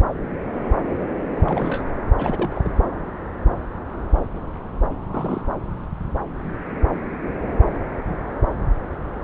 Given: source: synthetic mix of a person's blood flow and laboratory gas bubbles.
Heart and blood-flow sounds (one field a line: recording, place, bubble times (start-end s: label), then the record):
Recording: Doppler ultrasound of blood flow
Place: subclavian vein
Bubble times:
1.40-1.92 s: bubbles
2.18-2.69 s: bubbles
5.12-5.43 s: bubbles
From the record:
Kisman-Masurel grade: 221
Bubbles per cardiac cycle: several, 3 to 8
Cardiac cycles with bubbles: 10 to 50%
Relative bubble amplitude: barely perceptible (0.100 to 0.250)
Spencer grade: 2 (many but less than half of the cardiac periods contain bubble signals, singularly or in groups)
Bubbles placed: anywhere in the cardiac cycle